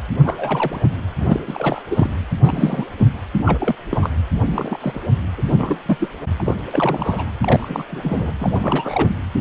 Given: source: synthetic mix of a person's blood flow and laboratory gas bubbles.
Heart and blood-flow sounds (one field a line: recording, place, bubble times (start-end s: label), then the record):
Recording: Doppler ultrasound of blood flow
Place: precordium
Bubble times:
0.24-0.96 s: bubbles
1.18-1.40 s: bubbles
1.47-1.82 s: bubbles
1.91-2.10 s: bubbles
2.43-2.90 s: bubbles
2.98-3.06 s: bubbles
3.38-3.75 s: bubbles
3.90-4.10 s: bubbles
4.46-5.00 s: bubbles
5.38-5.43 s: bubbles
5.48-5.54 s: bubbles
5.57-5.79 s: bubbles
5.85-6.08 s: bubbles
6.38-6.54 s: bubbles
6.71-7.31 s: bubbles
7.41-7.83 s: bubbles
7.88-8.31 s: bubbles
8.41-9.09 s: bubbles
From the record:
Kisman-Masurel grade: 342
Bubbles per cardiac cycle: rolling drumbeat, 9 or more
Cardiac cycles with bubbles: 100%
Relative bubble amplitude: moderate (0.250 to 0.450)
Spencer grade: 3 (all of the cardiac periods contain showers or single bubble signals, but not dominating or overriding the cardiac motion signals)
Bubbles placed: anywhere in the cardiac cycle